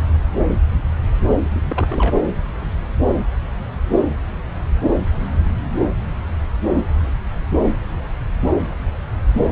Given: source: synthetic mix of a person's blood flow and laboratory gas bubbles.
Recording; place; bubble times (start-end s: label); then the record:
Doppler ultrasound of blood flow; subclavian vein
1.41-1.61 s: bubbles
1.70-2.16 s: bubbles
From the record:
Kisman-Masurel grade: 211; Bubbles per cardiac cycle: several, 3 to 8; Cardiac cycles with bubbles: 1 to 10%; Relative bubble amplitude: barely perceptible (0.100 to 0.250); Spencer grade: 1 (occasional bubble signal discernible with the cardiac motion signal, with majority of cardiac periods free of bubbles); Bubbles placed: anywhere in the cardiac cycle